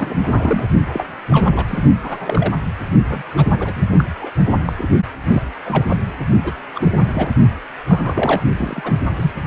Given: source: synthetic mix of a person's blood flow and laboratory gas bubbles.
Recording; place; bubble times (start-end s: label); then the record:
Doppler ultrasound of blood flow; precordium
0.00-0.18 s: bubbles
0.23-0.69 s: bubbles
0.93-1.04 s: bubbles
1.30-1.50 s: bubbles
1.55-1.80 s: bubbles
2.02-2.53 s: bubbles
3.05-3.22 s: bubbles
3.30-3.49 s: bubbles
3.59-3.73 s: bubbles
3.76-3.83 s: bubbles
3.98-4.04 s: bubbles
4.21-4.32 s: bubbles
4.65-4.73 s: bubbles
4.78-4.87 s: bubbles
5.32-5.51 s: bubbles
5.66-5.85 s: bubbles
5.90-5.96 s: bubbles
6.43-6.52 s: bubbles
6.75-7.31 s: bubbles
7.87-8.42 s: bubbles
8.57-8.93 s: bubbles
9.16-9.32 s: bubbles
From the record:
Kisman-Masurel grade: 242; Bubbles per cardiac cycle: several, 3 to 8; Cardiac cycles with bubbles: 100%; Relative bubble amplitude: moderate (0.250 to 0.450); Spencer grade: 3 (all of the cardiac periods contain showers or single bubble signals, but not dominating or overriding the cardiac motion signals); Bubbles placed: only in the low amplitude regions of the cardiac cycle